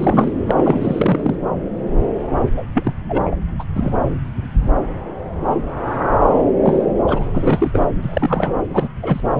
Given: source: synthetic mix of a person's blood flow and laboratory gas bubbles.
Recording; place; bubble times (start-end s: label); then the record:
Doppler ultrasound of blood flow; subclavian vein
0.00-0.32 s: bubbles
0.47-1.34 s: bubbles
2.56-2.65 s: bubbles
2.74-2.92 s: bubbles
3.08-3.37 s: bubbles
3.58-3.64 s: bubbles
3.75-3.95 s: bubbles
6.63-6.87 s: bubbles
7.08-7.23 s: bubbles
7.26-7.79 s: bubbles
8.03-8.52 s: bubbles
8.71-8.88 s: bubbles
9.02-9.21 s: bubbles
From the record:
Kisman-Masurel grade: 233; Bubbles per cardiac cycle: several, 3 to 8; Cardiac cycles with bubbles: 50 to 99%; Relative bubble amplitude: loud (0.450 to 0.775); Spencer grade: 3 (all of the cardiac periods contain showers or single bubble signals, but not dominating or overriding the cardiac motion signals); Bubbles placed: anywhere in the cardiac cycle